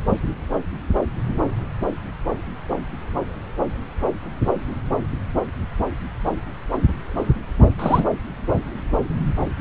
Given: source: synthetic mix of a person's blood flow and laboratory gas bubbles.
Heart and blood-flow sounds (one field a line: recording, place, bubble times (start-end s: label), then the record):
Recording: Doppler ultrasound of blood flow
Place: subclavian vein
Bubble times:
7.79-8.05 s: bubbles
From the record:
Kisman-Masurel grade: 212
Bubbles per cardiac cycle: several, 3 to 8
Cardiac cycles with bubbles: 1 to 10%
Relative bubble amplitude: moderate (0.250 to 0.450)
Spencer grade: 1 (occasional bubble signal discernible with the cardiac motion signal, with majority of cardiac periods free of bubbles)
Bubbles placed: anywhere in the cardiac cycle